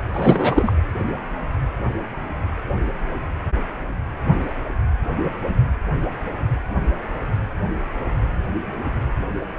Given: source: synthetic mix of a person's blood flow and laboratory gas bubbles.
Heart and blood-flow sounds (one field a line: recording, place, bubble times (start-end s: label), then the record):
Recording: Doppler ultrasound of blood flow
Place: precordium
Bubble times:
0.13-0.73 s: bubbles
From the record:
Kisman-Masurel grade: 213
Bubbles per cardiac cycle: several, 3 to 8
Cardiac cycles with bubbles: 1 to 10%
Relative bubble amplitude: loud (0.450 to 0.775)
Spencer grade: 1 (occasional bubble signal discernible with the cardiac motion signal, with majority of cardiac periods free of bubbles)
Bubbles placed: anywhere in the cardiac cycle